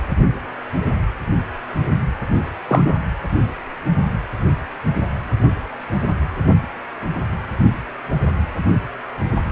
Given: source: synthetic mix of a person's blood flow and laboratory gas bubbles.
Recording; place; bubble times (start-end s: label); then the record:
Doppler ultrasound of blood flow; precordium
2.68-2.97 s: bubbles
From the record:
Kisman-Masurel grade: 113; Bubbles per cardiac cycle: 1 to 2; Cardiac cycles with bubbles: 1 to 10%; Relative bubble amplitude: loud (0.450 to 0.775); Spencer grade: 1 (occasional bubble signal discernible with the cardiac motion signal, with majority of cardiac periods free of bubbles); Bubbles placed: anywhere in the cardiac cycle